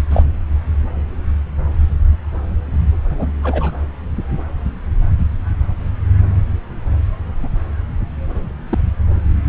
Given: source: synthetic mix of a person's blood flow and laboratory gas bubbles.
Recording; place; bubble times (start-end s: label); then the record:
Doppler ultrasound of blood flow; subclavian vein
0.10-0.23 s: bubbles
3.10-3.27 s: bubbles
3.43-3.71 s: bubbles
7.38-7.48 s: bubbles
8.29-8.52 s: bubbles
8.69-8.79 s: bubbles
From the record:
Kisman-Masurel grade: 122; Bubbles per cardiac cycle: 1 to 2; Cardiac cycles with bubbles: 10 to 50%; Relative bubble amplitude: moderate (0.250 to 0.450); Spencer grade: 2 (many but less than half of the cardiac periods contain bubble signals, singularly or in groups); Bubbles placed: anywhere in the cardiac cycle